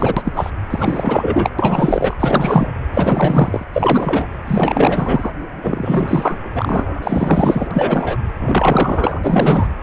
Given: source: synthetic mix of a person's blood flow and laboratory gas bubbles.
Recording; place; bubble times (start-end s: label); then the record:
Doppler ultrasound of blood flow; precordium
0.00-0.50 s: bubbles
0.70-1.50 s: bubbles
1.58-2.17 s: bubbles
2.19-2.73 s: bubbles
2.94-3.65 s: bubbles
3.73-4.26 s: bubbles
4.47-5.30 s: bubbles
5.62-6.38 s: bubbles
6.54-7.68 s: bubbles
7.71-8.18 s: bubbles
8.39-9.20 s: bubbles
9.24-9.69 s: bubbles
From the record:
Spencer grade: 4 (maximum detectable bubble signal sounding continuously throughout systole and diastole of every cardiac period, and overriding the amplitude of the normal cardiac signals); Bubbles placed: anywhere in the cardiac cycle